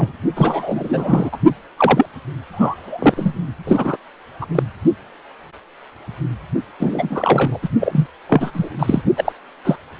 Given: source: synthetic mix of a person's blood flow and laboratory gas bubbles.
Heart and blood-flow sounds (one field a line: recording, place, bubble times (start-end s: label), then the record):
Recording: Doppler ultrasound of blood flow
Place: precordium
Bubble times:
0.00-0.12 s: bubbles
0.36-1.37 s: bubbles
1.77-2.06 s: bubbles
2.52-3.14 s: bubbles
3.17-3.33 s: bubbles
3.67-3.96 s: bubbles
4.41-4.46 s: bubbles
4.55-4.62 s: bubbles
6.79-7.58 s: bubbles
7.62-7.69 s: bubbles
7.80-8.06 s: bubbles
8.29-8.51 s: bubbles
8.54-8.70 s: bubbles
8.79-9.02 s: bubbles
9.16-9.32 s: bubbles
9.64-9.77 s: bubbles
From the record:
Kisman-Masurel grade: 233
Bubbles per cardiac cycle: several, 3 to 8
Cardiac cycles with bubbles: 50 to 99%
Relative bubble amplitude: loud (0.450 to 0.775)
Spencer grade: 3 (all of the cardiac periods contain showers or single bubble signals, but not dominating or overriding the cardiac motion signals)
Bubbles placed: only in the low amplitude regions of the cardiac cycle